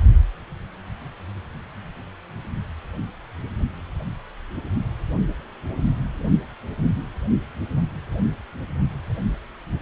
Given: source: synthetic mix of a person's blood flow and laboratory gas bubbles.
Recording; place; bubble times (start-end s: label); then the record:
Doppler ultrasound of blood flow; precordium
no bubbles
From the record:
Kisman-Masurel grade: 000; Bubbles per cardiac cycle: 0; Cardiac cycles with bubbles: 0%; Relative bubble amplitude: no bubbles discernible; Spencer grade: 0 (complete lack of bubble signals)